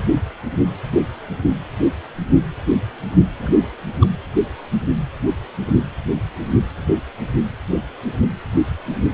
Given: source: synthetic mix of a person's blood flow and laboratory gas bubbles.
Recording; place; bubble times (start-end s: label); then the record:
Doppler ultrasound of blood flow; precordium
3.38-3.52 s: bubbles
3.56-3.67 s: bubbles
4.00-4.07 s: bubbles
From the record:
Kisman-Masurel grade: 211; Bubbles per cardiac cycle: several, 3 to 8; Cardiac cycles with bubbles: 1 to 10%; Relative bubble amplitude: barely perceptible (0.100 to 0.250); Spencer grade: 1 (occasional bubble signal discernible with the cardiac motion signal, with majority of cardiac periods free of bubbles); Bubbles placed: anywhere in the cardiac cycle